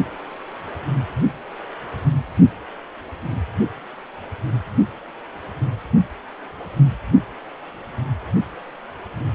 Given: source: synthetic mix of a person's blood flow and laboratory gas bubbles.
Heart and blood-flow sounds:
Doppler ultrasound of blood flow; precordium
no bubbles
From the record:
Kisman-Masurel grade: 000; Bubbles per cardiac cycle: 0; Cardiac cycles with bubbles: 0%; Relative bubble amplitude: no bubbles discernible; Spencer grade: 0 (complete lack of bubble signals)

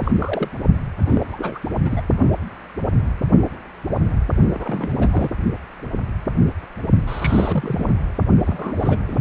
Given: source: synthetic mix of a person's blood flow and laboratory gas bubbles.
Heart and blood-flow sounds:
Doppler ultrasound of blood flow; precordium
0.00-0.12 s: bubbles
0.18-0.50 s: bubbles
1.06-1.26 s: bubbles
1.32-1.60 s: bubbles
1.85-2.01 s: bubbles
4.53-5.30 s: bubbles
7.08-7.94 s: bubbles
8.45-9.01 s: bubbles
9.07-9.17 s: bubbles
From the record:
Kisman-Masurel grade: 332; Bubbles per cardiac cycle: rolling drumbeat, 9 or more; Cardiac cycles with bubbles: 50 to 99%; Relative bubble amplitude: moderate (0.250 to 0.450); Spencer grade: 3 (all of the cardiac periods contain showers or single bubble signals, but not dominating or overriding the cardiac motion signals); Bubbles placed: only in the low amplitude regions of the cardiac cycle

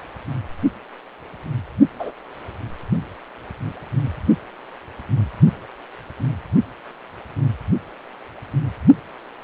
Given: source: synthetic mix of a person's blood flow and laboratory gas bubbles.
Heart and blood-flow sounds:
Doppler ultrasound of blood flow; precordium
1.99-2.11 s: bubbles
From the record:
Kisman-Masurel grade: 122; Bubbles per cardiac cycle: 1 to 2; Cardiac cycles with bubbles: 10 to 50%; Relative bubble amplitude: moderate (0.250 to 0.450); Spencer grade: 2 (many but less than half of the cardiac periods contain bubble signals, singularly or in groups); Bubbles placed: only in the low amplitude regions of the cardiac cycle

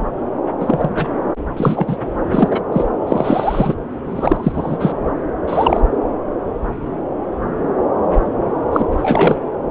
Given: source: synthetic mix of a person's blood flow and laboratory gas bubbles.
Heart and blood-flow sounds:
Doppler ultrasound of blood flow; subclavian vein
0.59-0.91 s: bubbles
0.94-1.18 s: bubbles
1.56-1.97 s: bubbles
2.33-2.62 s: bubbles
2.72-2.85 s: bubbles
3.07-3.75 s: bubbles
4.09-4.93 s: bubbles
5.47-5.80 s: bubbles
8.72-8.86 s: bubbles
8.91-9.38 s: bubbles
From the record:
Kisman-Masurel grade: 223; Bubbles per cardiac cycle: several, 3 to 8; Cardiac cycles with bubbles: 10 to 50%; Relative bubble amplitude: loud (0.450 to 0.775); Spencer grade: 2 (many but less than half of the cardiac periods contain bubble signals, singularly or in groups); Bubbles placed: anywhere in the cardiac cycle

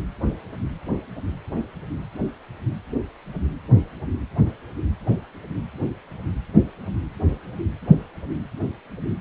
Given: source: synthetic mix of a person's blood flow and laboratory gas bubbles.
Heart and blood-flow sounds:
Doppler ultrasound of blood flow; precordium
no bubbles
From the record:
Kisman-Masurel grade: 000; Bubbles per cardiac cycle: 0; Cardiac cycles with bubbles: 0%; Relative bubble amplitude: no bubbles discernible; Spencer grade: 0 (complete lack of bubble signals)

